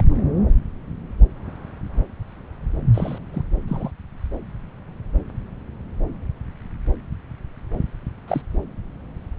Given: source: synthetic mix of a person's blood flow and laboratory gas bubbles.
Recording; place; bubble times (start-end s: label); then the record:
Doppler ultrasound of blood flow; subclavian vein
0.00-0.20 s: bubbles
2.94-3.19 s: bubbles
3.33-3.42 s: bubbles
3.67-3.91 s: bubbles
8.27-8.41 s: bubbles
From the record:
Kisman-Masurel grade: 121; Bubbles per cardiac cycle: 1 to 2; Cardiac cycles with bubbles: 10 to 50%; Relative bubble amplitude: barely perceptible (0.100 to 0.250); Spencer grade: 2 (many but less than half of the cardiac periods contain bubble signals, singularly or in groups); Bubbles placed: anywhere in the cardiac cycle